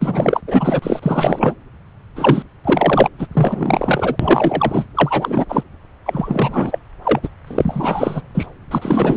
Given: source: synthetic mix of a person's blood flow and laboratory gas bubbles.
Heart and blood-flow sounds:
Doppler ultrasound of blood flow; subclavian vein
0.01-0.41 s: bubbles
0.47-0.80 s: bubbles
0.82-0.99 s: bubbles
1.02-1.55 s: bubbles
2.16-2.43 s: bubbles
2.64-3.08 s: bubbles
3.18-3.27 s: bubbles
3.32-4.16 s: bubbles
4.19-4.85 s: bubbles
4.96-5.46 s: bubbles
5.48-5.63 s: bubbles
6.05-6.78 s: bubbles
7.03-7.20 s: bubbles
7.22-7.28 s: bubbles
7.47-8.22 s: bubbles
8.35-8.46 s: bubbles
8.71-9.17 s: bubbles
From the record:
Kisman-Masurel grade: 343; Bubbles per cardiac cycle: rolling drumbeat, 9 or more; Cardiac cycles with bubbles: 100%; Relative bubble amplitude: loud (0.450 to 0.775); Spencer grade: 3 (all of the cardiac periods contain showers or single bubble signals, but not dominating or overriding the cardiac motion signals); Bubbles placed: anywhere in the cardiac cycle

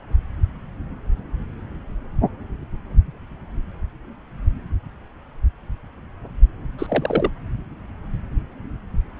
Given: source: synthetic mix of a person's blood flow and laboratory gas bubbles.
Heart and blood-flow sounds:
Doppler ultrasound of blood flow; subclavian vein
6.79-7.30 s: bubbles
From the record:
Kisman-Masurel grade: 122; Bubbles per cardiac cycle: 1 to 2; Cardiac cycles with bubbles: 10 to 50%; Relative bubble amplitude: moderate (0.250 to 0.450); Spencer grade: 2 (many but less than half of the cardiac periods contain bubble signals, singularly or in groups); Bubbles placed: anywhere in the cardiac cycle

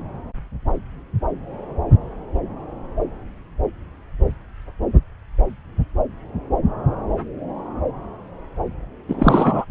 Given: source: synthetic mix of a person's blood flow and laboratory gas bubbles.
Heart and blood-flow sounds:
Doppler ultrasound of blood flow; subclavian vein
9.08-9.65 s: bubbles
From the record:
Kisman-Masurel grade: 213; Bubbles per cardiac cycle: several, 3 to 8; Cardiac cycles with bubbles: 1 to 10%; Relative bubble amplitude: loud (0.450 to 0.775); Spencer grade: 1 (occasional bubble signal discernible with the cardiac motion signal, with majority of cardiac periods free of bubbles); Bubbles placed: anywhere in the cardiac cycle

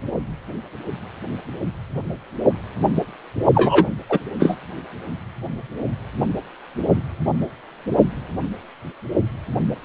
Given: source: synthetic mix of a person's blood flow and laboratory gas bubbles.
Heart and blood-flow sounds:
Doppler ultrasound of blood flow; precordium
3.54-3.86 s: bubbles
4.09-4.19 s: bubbles
4.39-4.56 s: bubbles
From the record:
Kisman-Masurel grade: 223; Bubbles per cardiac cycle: several, 3 to 8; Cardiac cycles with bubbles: 10 to 50%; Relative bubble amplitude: loud (0.450 to 0.775); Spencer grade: 2 (many but less than half of the cardiac periods contain bubble signals, singularly or in groups); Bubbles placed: only in the low amplitude regions of the cardiac cycle

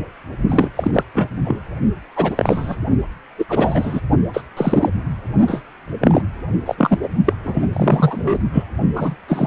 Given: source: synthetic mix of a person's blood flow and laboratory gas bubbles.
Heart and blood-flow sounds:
Doppler ultrasound of blood flow; precordium
0.49-0.69 s: bubbles
0.76-0.91 s: bubbles
0.93-1.03 s: bubbles
1.14-1.27 s: bubbles
1.44-1.59 s: bubbles
2.16-2.76 s: bubbles
3.38-3.45 s: bubbles
3.49-4.00 s: bubbles
4.33-4.42 s: bubbles
4.56-4.90 s: bubbles
5.47-5.61 s: bubbles
6.00-6.21 s: bubbles
6.65-6.75 s: bubbles
6.77-6.98 s: bubbles
7.02-7.08 s: bubbles
7.25-7.33 s: bubbles
7.43-7.63 s: bubbles
7.73-8.39 s: bubbles
8.53-8.64 s: bubbles
8.96-9.15 s: bubbles
9.28-9.47 s: bubbles
From the record:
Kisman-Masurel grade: 243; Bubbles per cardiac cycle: several, 3 to 8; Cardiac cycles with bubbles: 100%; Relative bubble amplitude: loud (0.450 to 0.775); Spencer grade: 3 (all of the cardiac periods contain showers or single bubble signals, but not dominating or overriding the cardiac motion signals); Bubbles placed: only in the low amplitude regions of the cardiac cycle

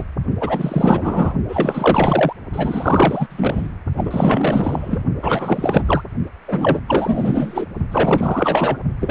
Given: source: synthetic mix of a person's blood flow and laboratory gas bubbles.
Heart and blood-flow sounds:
Doppler ultrasound of blood flow; precordium
0.00-0.04 s: bubbles
0.40-1.34 s: bubbles
1.48-2.33 s: bubbles
2.52-3.71 s: bubbles
3.97-5.03 s: bubbles
5.22-6.03 s: bubbles
6.48-6.79 s: bubbles
6.88-7.66 s: bubbles
7.91-8.77 s: bubbles
9.00-9.10 s: bubbles
From the record:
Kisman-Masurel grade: 444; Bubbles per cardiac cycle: continuous sound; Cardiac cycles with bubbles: 100%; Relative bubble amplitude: maximal (0.775 to 0.999); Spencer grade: 4 (maximum detectable bubble signal sounding continuously throughout systole and diastole of every cardiac period, and overriding the amplitude of the normal cardiac signals); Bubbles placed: only in the low amplitude regions of the cardiac cycle

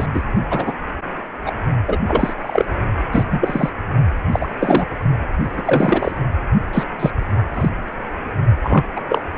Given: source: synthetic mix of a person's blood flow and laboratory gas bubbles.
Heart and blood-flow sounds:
Doppler ultrasound of blood flow; precordium
0.00-0.07 s: bubbles
0.13-0.21 s: bubbles
0.49-0.73 s: bubbles
1.46-1.51 s: bubbles
1.87-1.97 s: bubbles
2.07-2.33 s: bubbles
2.41-2.65 s: bubbles
3.12-3.24 s: bubbles
3.30-3.70 s: bubbles
4.31-4.48 s: bubbles
4.59-4.87 s: bubbles
5.57-6.15 s: bubbles
6.73-6.83 s: bubbles
6.99-7.10 s: bubbles
7.54-7.69 s: bubbles
8.62-8.84 s: bubbles
8.96-9.01 s: bubbles
9.09-9.25 s: bubbles
From the record:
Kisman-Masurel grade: 243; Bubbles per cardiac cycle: several, 3 to 8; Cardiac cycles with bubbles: 100%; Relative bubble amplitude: loud (0.450 to 0.775); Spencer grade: 3 (all of the cardiac periods contain showers or single bubble signals, but not dominating or overriding the cardiac motion signals); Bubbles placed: only in the low amplitude regions of the cardiac cycle

